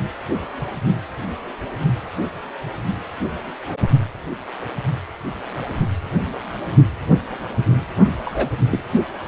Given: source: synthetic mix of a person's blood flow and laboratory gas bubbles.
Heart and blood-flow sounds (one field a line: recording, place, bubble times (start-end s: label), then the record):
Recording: Doppler ultrasound of blood flow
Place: precordium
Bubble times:
8.25-8.50 s: bubbles
8.71-8.84 s: bubbles
From the record:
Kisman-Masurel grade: 122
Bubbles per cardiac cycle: 1 to 2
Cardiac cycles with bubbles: 10 to 50%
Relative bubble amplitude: moderate (0.250 to 0.450)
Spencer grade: 2 (many but less than half of the cardiac periods contain bubble signals, singularly or in groups)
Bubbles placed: only in the low amplitude regions of the cardiac cycle